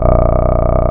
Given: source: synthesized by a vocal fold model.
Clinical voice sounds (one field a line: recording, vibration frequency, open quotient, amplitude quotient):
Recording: sustained vowel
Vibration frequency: 30 Hz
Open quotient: 0.5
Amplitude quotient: 1.4